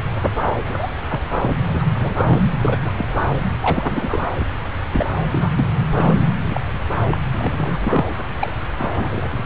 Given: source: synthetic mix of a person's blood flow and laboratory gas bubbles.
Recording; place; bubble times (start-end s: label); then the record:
Doppler ultrasound of blood flow; subclavian vein
0.23-0.30 s: bubbles
0.67-0.91 s: bubbles
1.09-1.21 s: bubbles
1.31-1.62 s: bubbles
1.73-1.86 s: bubbles
1.95-2.40 s: bubbles
2.61-3.13 s: bubbles
3.38-3.53 s: bubbles
3.60-4.19 s: bubbles
4.34-4.46 s: bubbles
4.92-5.06 s: bubbles
5.32-5.50 s: bubbles
5.58-5.67 s: bubbles
5.90-6.21 s: bubbles
6.43-6.61 s: bubbles
7.08-7.18 s: bubbles
7.32-8.13 s: bubbles
8.39-8.52 s: bubbles
8.79-9.45 s: bubbles
From the record:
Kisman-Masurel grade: 242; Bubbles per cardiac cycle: several, 3 to 8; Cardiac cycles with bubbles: 100%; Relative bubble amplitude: moderate (0.250 to 0.450); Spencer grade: 3 (all of the cardiac periods contain showers or single bubble signals, but not dominating or overriding the cardiac motion signals); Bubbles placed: anywhere in the cardiac cycle